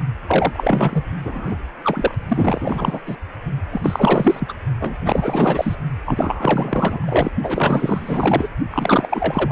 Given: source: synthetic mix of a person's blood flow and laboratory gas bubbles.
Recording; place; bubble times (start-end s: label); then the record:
Doppler ultrasound of blood flow; precordium
0.28-1.04 s: bubbles
1.24-1.56 s: bubbles
1.82-2.15 s: bubbles
2.28-3.00 s: bubbles
3.06-3.17 s: bubbles
3.72-4.53 s: bubbles
4.80-4.97 s: bubbles
5.04-5.75 s: bubbles
6.05-7.31 s: bubbles
7.42-8.49 s: bubbles
8.70-9.51 s: bubbles
From the record:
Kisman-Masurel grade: 444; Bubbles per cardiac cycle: continuous sound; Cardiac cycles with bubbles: 100%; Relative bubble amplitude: maximal (0.775 to 0.999); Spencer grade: 4 (maximum detectable bubble signal sounding continuously throughout systole and diastole of every cardiac period, and overriding the amplitude of the normal cardiac signals); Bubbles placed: only in the low amplitude regions of the cardiac cycle